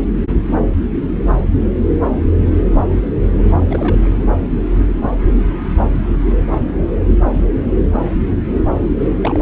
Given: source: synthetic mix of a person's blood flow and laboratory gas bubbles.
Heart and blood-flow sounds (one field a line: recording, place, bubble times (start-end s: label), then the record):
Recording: Doppler ultrasound of blood flow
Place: subclavian vein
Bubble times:
3.44-3.66 s: bubbles
3.70-4.15 s: bubbles
8.98-9.06 s: bubbles
9.10-9.15 s: bubbles
9.21-9.39 s: bubbles
From the record:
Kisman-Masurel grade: 222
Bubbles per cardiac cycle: several, 3 to 8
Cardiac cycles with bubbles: 10 to 50%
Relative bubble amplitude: moderate (0.250 to 0.450)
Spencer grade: 2 (many but less than half of the cardiac periods contain bubble signals, singularly or in groups)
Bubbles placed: anywhere in the cardiac cycle